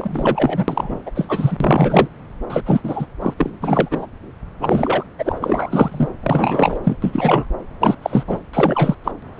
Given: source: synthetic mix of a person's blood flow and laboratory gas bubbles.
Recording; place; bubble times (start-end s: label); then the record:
Doppler ultrasound of blood flow; subclavian vein
0.00-1.02 s: bubbles
1.06-1.11 s: bubbles
1.15-1.57 s: bubbles
1.60-2.08 s: bubbles
2.48-2.80 s: bubbles
2.83-3.06 s: bubbles
3.21-3.34 s: bubbles
3.38-3.51 s: bubbles
3.62-4.07 s: bubbles
4.61-5.04 s: bubbles
5.19-6.09 s: bubbles
6.23-6.79 s: bubbles
6.83-6.97 s: bubbles
7.02-7.46 s: bubbles
7.80-7.95 s: bubbles
8.02-8.23 s: bubbles
8.27-8.39 s: bubbles
8.53-8.95 s: bubbles
9.04-9.12 s: bubbles
9.38-9.40 s: bubbles
From the record:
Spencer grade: 3 (all of the cardiac periods contain showers or single bubble signals, but not dominating or overriding the cardiac motion signals); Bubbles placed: anywhere in the cardiac cycle